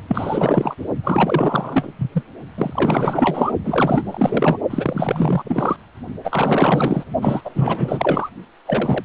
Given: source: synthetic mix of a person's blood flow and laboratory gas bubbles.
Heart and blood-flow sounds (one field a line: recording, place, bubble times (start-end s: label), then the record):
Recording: Doppler ultrasound of blood flow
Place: precordium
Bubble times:
0.07-0.76 s: bubbles
1.03-1.93 s: bubbles
1.99-2.23 s: bubbles
2.57-3.51 s: bubbles
3.64-4.58 s: bubbles
4.70-5.77 s: bubbles
6.23-7.04 s: bubbles
7.21-8.29 s: bubbles
8.65-9.05 s: bubbles
From the record:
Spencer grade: 4 (maximum detectable bubble signal sounding continuously throughout systole and diastole of every cardiac period, and overriding the amplitude of the normal cardiac signals)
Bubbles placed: only in the low amplitude regions of the cardiac cycle